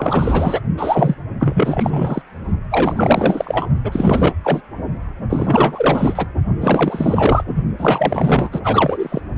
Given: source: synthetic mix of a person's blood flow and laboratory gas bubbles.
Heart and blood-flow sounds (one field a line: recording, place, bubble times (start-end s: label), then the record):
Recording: Doppler ultrasound of blood flow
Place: precordium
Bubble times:
0.00-0.61 s: bubbles
0.77-1.15 s: bubbles
1.40-2.22 s: bubbles
2.70-3.67 s: bubbles
3.83-4.33 s: bubbles
4.44-4.62 s: bubbles
5.29-6.27 s: bubbles
6.61-7.44 s: bubbles
7.46-7.63 s: bubbles
7.78-8.60 s: bubbles
8.62-9.21 s: bubbles
From the record:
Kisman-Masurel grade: 444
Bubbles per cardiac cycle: continuous sound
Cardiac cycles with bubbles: 100%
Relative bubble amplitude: maximal (0.775 to 0.999)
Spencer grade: 4 (maximum detectable bubble signal sounding continuously throughout systole and diastole of every cardiac period, and overriding the amplitude of the normal cardiac signals)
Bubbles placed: only in the low amplitude regions of the cardiac cycle